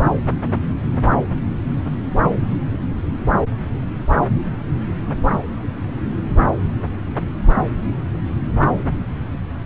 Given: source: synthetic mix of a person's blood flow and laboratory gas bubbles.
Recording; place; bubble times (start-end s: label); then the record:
Doppler ultrasound of blood flow; subclavian vein
no bubbles
From the record:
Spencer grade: 0 (complete lack of bubble signals)